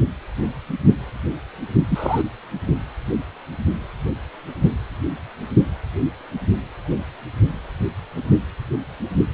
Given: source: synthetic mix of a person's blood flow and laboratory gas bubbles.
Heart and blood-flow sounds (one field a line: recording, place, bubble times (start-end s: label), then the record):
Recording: Doppler ultrasound of blood flow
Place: precordium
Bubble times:
1.90-2.21 s: bubbles
From the record:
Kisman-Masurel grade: 113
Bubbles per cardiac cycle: 1 to 2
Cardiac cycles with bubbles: 1 to 10%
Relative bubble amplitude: loud (0.450 to 0.775)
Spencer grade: 1 (occasional bubble signal discernible with the cardiac motion signal, with majority of cardiac periods free of bubbles)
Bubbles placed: only in the low amplitude regions of the cardiac cycle